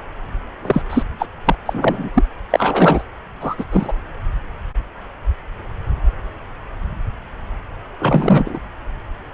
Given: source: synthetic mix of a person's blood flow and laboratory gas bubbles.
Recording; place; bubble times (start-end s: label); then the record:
Doppler ultrasound of blood flow; subclavian vein
0.61-0.82 s: bubbles
0.89-1.03 s: bubbles
1.19-1.27 s: bubbles
1.45-1.56 s: bubbles
1.66-2.10 s: bubbles
2.14-2.23 s: bubbles
2.50-3.03 s: bubbles
3.41-3.56 s: bubbles
3.58-3.65 s: bubbles
3.72-3.94 s: bubbles
7.99-8.59 s: bubbles
From the record:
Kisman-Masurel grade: 223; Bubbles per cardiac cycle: several, 3 to 8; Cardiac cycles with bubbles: 10 to 50%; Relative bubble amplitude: loud (0.450 to 0.775); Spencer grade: 2 (many but less than half of the cardiac periods contain bubble signals, singularly or in groups); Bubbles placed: anywhere in the cardiac cycle